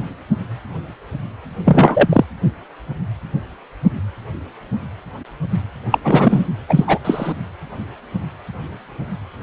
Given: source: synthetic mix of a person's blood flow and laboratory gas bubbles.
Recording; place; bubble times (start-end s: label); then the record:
Doppler ultrasound of blood flow; precordium
1.65-2.25 s: bubbles
5.91-5.98 s: bubbles
6.04-6.48 s: bubbles
6.69-6.98 s: bubbles
7.04-7.32 s: bubbles
From the record:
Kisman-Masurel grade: 223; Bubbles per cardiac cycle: several, 3 to 8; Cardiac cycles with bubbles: 10 to 50%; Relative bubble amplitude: loud (0.450 to 0.775); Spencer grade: 2 (many but less than half of the cardiac periods contain bubble signals, singularly or in groups); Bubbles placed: anywhere in the cardiac cycle